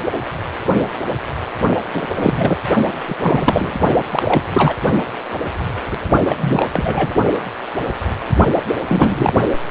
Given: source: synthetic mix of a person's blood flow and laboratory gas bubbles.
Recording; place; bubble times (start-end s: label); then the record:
Doppler ultrasound of blood flow; precordium
1.94-2.06 s: bubbles
2.16-2.58 s: bubbles
3.07-3.15 s: bubbles
3.20-3.77 s: bubbles
4.10-4.42 s: bubbles
4.54-4.76 s: bubbles
6.19-6.69 s: bubbles
6.73-7.15 s: bubbles
8.55-8.62 s: bubbles
8.88-9.33 s: bubbles
From the record:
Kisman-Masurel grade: 333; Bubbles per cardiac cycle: rolling drumbeat, 9 or more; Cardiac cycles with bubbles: 50 to 99%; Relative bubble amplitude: loud (0.450 to 0.775); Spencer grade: 3 (all of the cardiac periods contain showers or single bubble signals, but not dominating or overriding the cardiac motion signals); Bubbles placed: only in the low amplitude regions of the cardiac cycle